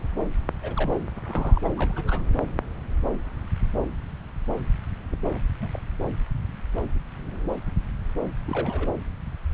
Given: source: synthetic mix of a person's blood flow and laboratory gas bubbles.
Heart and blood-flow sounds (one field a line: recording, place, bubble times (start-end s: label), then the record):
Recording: Doppler ultrasound of blood flow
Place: subclavian vein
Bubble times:
0.62-0.91 s: bubbles
1.16-1.20 s: bubbles
1.23-1.60 s: bubbles
1.65-1.69 s: bubbles
1.77-2.22 s: bubbles
5.11-5.17 s: bubbles
5.27-5.40 s: bubbles
5.61-5.69 s: bubbles
5.71-5.79 s: bubbles
8.48-8.90 s: bubbles
From the record:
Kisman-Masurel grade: 221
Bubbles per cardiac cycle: several, 3 to 8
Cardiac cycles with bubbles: 10 to 50%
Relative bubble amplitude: barely perceptible (0.100 to 0.250)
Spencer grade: 2 (many but less than half of the cardiac periods contain bubble signals, singularly or in groups)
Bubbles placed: anywhere in the cardiac cycle